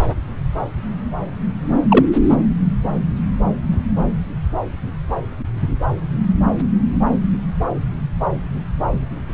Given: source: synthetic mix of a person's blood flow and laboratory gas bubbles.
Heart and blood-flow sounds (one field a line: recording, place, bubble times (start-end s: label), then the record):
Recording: Doppler ultrasound of blood flow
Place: subclavian vein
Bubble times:
1.89-2.06 s: bubbles
From the record:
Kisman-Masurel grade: 113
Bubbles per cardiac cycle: 1 to 2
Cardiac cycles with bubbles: 1 to 10%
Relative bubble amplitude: loud (0.450 to 0.775)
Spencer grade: 1 (occasional bubble signal discernible with the cardiac motion signal, with majority of cardiac periods free of bubbles)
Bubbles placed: anywhere in the cardiac cycle